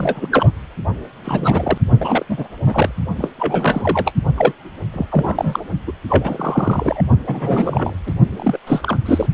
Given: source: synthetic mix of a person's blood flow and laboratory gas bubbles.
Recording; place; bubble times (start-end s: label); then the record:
Doppler ultrasound of blood flow; precordium
0.00-0.53 s: bubbles
1.25-1.78 s: bubbles
1.98-2.25 s: bubbles
2.29-2.48 s: bubbles
2.66-2.94 s: bubbles
3.17-3.28 s: bubbles
3.38-4.12 s: bubbles
4.37-4.52 s: bubbles
4.93-5.06 s: bubbles
5.12-5.61 s: bubbles
5.87-5.92 s: bubbles
6.08-7.02 s: bubbles
7.26-7.97 s: bubbles
8.06-8.13 s: bubbles
8.30-8.58 s: bubbles
8.67-8.97 s: bubbles
9.06-9.27 s: bubbles
From the record:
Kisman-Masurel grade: 342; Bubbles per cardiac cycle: rolling drumbeat, 9 or more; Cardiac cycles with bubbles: 100%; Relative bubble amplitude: moderate (0.250 to 0.450); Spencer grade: 3 (all of the cardiac periods contain showers or single bubble signals, but not dominating or overriding the cardiac motion signals); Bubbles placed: only in the low amplitude regions of the cardiac cycle